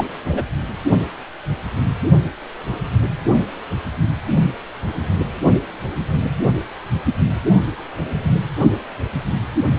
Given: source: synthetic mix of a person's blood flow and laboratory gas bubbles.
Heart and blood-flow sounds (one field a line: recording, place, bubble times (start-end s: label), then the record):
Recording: Doppler ultrasound of blood flow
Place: precordium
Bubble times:
0.00-0.05 s: bubbles
0.28-0.43 s: bubbles
From the record:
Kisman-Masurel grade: 112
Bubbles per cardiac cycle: 1 to 2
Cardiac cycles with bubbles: 1 to 10%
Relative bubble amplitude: moderate (0.250 to 0.450)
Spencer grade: 1 (occasional bubble signal discernible with the cardiac motion signal, with majority of cardiac periods free of bubbles)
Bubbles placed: only in the low amplitude regions of the cardiac cycle